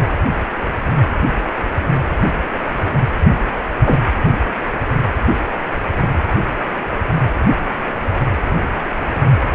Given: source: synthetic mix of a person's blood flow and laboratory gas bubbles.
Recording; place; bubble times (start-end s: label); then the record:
Doppler ultrasound of blood flow; precordium
3.83-3.99 s: bubbles
From the record:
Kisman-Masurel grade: 113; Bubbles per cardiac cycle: 1 to 2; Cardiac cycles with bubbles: 1 to 10%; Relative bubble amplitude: loud (0.450 to 0.775); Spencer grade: 1 (occasional bubble signal discernible with the cardiac motion signal, with majority of cardiac periods free of bubbles); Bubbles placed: anywhere in the cardiac cycle